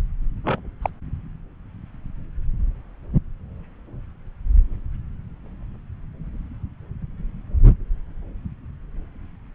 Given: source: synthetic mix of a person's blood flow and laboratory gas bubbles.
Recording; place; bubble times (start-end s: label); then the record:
Doppler ultrasound of blood flow; subclavian vein
0.44-0.59 s: bubbles
0.82-0.89 s: bubbles
From the record:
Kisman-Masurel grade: 112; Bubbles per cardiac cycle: 1 to 2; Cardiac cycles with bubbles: 1 to 10%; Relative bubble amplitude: moderate (0.250 to 0.450); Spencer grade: 1 (occasional bubble signal discernible with the cardiac motion signal, with majority of cardiac periods free of bubbles); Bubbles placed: anywhere in the cardiac cycle